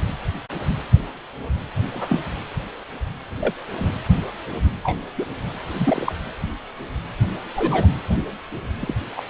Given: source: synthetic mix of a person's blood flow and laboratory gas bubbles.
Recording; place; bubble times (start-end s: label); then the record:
Doppler ultrasound of blood flow; precordium
1.95-2.20 s: bubbles
3.40-3.54 s: bubbles
3.71-3.92 s: bubbles
4.83-5.00 s: bubbles
5.17-5.26 s: bubbles
5.63-6.12 s: bubbles
7.56-7.87 s: bubbles
8.79-8.94 s: bubbles
9.16-9.21 s: bubbles
From the record:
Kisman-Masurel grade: 122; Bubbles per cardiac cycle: 1 to 2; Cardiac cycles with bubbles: 10 to 50%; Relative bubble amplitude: moderate (0.250 to 0.450); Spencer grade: 2 (many but less than half of the cardiac periods contain bubble signals, singularly or in groups); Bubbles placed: anywhere in the cardiac cycle